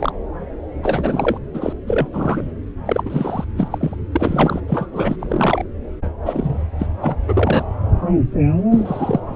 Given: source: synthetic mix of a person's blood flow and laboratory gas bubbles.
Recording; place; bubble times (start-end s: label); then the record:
Doppler ultrasound of blood flow; subclavian vein
0.00-0.12 s: bubbles
0.83-1.38 s: bubbles
1.53-1.73 s: bubbles
1.87-2.07 s: bubbles
2.13-2.52 s: bubbles
2.85-3.44 s: bubbles
3.56-3.95 s: bubbles
4.12-4.61 s: bubbles
4.67-4.90 s: bubbles
4.92-5.16 s: bubbles
5.19-5.64 s: bubbles
6.25-6.58 s: bubbles
6.79-6.87 s: bubbles
7.01-7.15 s: bubbles
7.28-7.65 s: bubbles
8.71-9.20 s: bubbles
9.26-9.36 s: bubbles
From the record:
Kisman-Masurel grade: 233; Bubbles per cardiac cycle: several, 3 to 8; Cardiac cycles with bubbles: 50 to 99%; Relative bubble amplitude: loud (0.450 to 0.775); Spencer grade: 3 (all of the cardiac periods contain showers or single bubble signals, but not dominating or overriding the cardiac motion signals); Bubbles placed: anywhere in the cardiac cycle